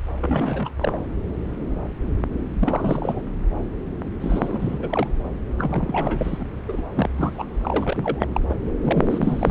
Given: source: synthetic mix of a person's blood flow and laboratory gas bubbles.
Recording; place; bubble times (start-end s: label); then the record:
Doppler ultrasound of blood flow; subclavian vein
0.20-0.72 s: bubbles
0.80-0.98 s: bubbles
2.59-3.21 s: bubbles
4.20-5.07 s: bubbles
5.57-6.46 s: bubbles
6.68-6.82 s: bubbles
6.95-7.10 s: bubbles
7.17-7.46 s: bubbles
7.54-8.26 s: bubbles
8.33-8.41 s: bubbles
8.49-8.55 s: bubbles
8.81-9.50 s: bubbles
From the record:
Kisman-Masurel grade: 333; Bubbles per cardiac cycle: rolling drumbeat, 9 or more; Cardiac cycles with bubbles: 50 to 99%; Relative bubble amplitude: loud (0.450 to 0.775); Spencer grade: 3 (all of the cardiac periods contain showers or single bubble signals, but not dominating or overriding the cardiac motion signals); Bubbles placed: anywhere in the cardiac cycle